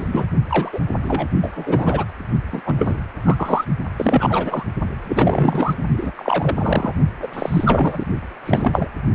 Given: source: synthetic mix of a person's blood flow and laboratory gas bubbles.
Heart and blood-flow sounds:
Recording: Doppler ultrasound of blood flow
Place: precordium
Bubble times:
0.00-0.26 s: bubbles
0.49-0.81 s: bubbles
1.03-1.27 s: bubbles
1.41-2.04 s: bubbles
2.52-2.62 s: bubbles
2.65-2.96 s: bubbles
3.23-3.65 s: bubbles
3.96-4.66 s: bubbles
5.04-5.74 s: bubbles
5.97-6.12 s: bubbles
6.16-6.92 s: bubbles
7.21-7.28 s: bubbles
7.33-8.05 s: bubbles
8.44-8.88 s: bubbles
From the record:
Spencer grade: 3 (all of the cardiac periods contain showers or single bubble signals, but not dominating or overriding the cardiac motion signals)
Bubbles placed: only in the low amplitude regions of the cardiac cycle

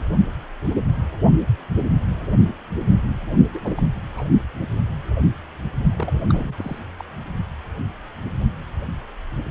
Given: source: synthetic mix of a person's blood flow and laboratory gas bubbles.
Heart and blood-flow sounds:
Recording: Doppler ultrasound of blood flow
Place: precordium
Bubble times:
3.53-3.83 s: bubbles
4.12-4.24 s: bubbles
5.97-6.19 s: bubbles
6.29-6.54 s: bubbles
6.58-6.78 s: bubbles
7.00-7.03 s: bubbles
From the record:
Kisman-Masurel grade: 221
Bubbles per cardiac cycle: several, 3 to 8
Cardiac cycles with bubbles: 10 to 50%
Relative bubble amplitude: barely perceptible (0.100 to 0.250)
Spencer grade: 2 (many but less than half of the cardiac periods contain bubble signals, singularly or in groups)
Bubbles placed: only in the low amplitude regions of the cardiac cycle

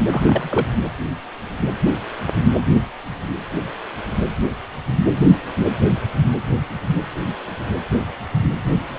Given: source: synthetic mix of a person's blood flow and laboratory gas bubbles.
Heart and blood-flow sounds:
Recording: Doppler ultrasound of blood flow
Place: precordium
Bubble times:
0.11-0.67 s: bubbles
From the record:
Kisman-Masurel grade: 212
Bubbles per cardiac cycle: several, 3 to 8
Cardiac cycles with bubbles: 1 to 10%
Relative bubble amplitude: moderate (0.250 to 0.450)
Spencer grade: 1 (occasional bubble signal discernible with the cardiac motion signal, with majority of cardiac periods free of bubbles)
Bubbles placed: anywhere in the cardiac cycle

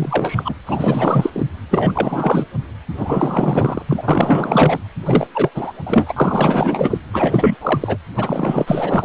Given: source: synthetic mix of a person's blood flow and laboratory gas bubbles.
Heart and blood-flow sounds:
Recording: Doppler ultrasound of blood flow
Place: precordium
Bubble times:
0.00-0.54 s: bubbles
0.66-1.30 s: bubbles
1.33-1.47 s: bubbles
1.71-2.46 s: bubbles
2.94-3.82 s: bubbles
3.87-4.03 s: bubbles
4.07-4.80 s: bubbles
5.05-5.27 s: bubbles
5.34-5.49 s: bubbles
5.54-5.72 s: bubbles
5.86-6.98 s: bubbles
7.12-7.56 s: bubbles
7.61-7.97 s: bubbles
8.16-9.05 s: bubbles
From the record:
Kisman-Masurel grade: 444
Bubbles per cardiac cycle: continuous sound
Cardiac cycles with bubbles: 100%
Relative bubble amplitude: maximal (0.775 to 0.999)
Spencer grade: 4 (maximum detectable bubble signal sounding continuously throughout systole and diastole of every cardiac period, and overriding the amplitude of the normal cardiac signals)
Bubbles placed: anywhere in the cardiac cycle

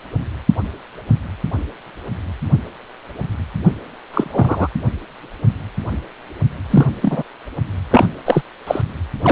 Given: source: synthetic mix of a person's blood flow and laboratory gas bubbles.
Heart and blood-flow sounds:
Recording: Doppler ultrasound of blood flow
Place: precordium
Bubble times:
4.13-4.68 s: bubbles
6.70-6.86 s: bubbles
7.01-7.23 s: bubbles
7.90-8.07 s: bubbles
8.25-8.42 s: bubbles
8.67-8.82 s: bubbles
9.23-9.32 s: bubbles
From the record:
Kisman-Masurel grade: 233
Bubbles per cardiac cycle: several, 3 to 8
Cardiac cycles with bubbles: 50 to 99%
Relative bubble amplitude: loud (0.450 to 0.775)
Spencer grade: 3 (all of the cardiac periods contain showers or single bubble signals, but not dominating or overriding the cardiac motion signals)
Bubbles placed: anywhere in the cardiac cycle

